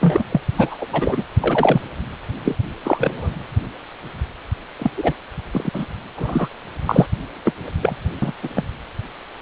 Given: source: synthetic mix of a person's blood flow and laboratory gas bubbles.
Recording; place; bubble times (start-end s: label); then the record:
Doppler ultrasound of blood flow; precordium
0.01-0.23 s: bubbles
0.31-0.41 s: bubbles
0.56-0.86 s: bubbles
0.92-1.23 s: bubbles
1.40-1.82 s: bubbles
2.44-2.56 s: bubbles
2.83-3.31 s: bubbles
4.78-4.90 s: bubbles
4.97-5.13 s: bubbles
5.52-5.69 s: bubbles
5.73-5.85 s: bubbles
6.15-6.48 s: bubbles
6.85-7.06 s: bubbles
7.45-7.52 s: bubbles
7.81-7.96 s: bubbles
8.22-8.32 s: bubbles
8.43-8.49 s: bubbles
8.56-8.63 s: bubbles
From the record:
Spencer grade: 3 (all of the cardiac periods contain showers or single bubble signals, but not dominating or overriding the cardiac motion signals); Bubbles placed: anywhere in the cardiac cycle